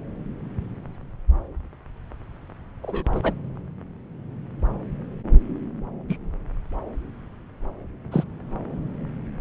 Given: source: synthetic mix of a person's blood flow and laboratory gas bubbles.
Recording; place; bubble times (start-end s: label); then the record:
Doppler ultrasound of blood flow; subclavian vein
2.82-3.20 s: bubbles
3.23-3.33 s: bubbles
6.09-6.17 s: bubbles
8.12-8.24 s: bubbles
From the record:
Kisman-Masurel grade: 122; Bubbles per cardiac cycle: 1 to 2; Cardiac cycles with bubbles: 10 to 50%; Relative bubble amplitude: moderate (0.250 to 0.450); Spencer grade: 2 (many but less than half of the cardiac periods contain bubble signals, singularly or in groups); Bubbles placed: anywhere in the cardiac cycle